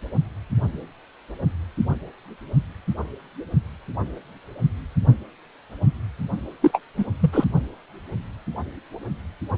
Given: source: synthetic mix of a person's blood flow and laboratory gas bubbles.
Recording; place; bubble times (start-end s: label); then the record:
Doppler ultrasound of blood flow; precordium
6.62-6.81 s: bubbles
6.97-7.06 s: bubbles
7.20-7.45 s: bubbles
From the record:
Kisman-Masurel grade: 213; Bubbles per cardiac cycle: several, 3 to 8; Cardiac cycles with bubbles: 1 to 10%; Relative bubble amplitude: loud (0.450 to 0.775); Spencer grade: 1 (occasional bubble signal discernible with the cardiac motion signal, with majority of cardiac periods free of bubbles); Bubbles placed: only in the low amplitude regions of the cardiac cycle